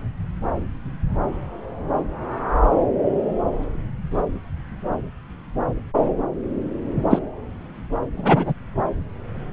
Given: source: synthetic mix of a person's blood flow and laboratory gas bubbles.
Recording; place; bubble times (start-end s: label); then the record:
Doppler ultrasound of blood flow; subclavian vein
7.10-7.19 s: bubbles
8.17-8.54 s: bubbles
From the record:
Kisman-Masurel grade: 123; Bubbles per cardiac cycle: 1 to 2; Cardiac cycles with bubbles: 10 to 50%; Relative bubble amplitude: loud (0.450 to 0.775); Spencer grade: 2 (many but less than half of the cardiac periods contain bubble signals, singularly or in groups); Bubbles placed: anywhere in the cardiac cycle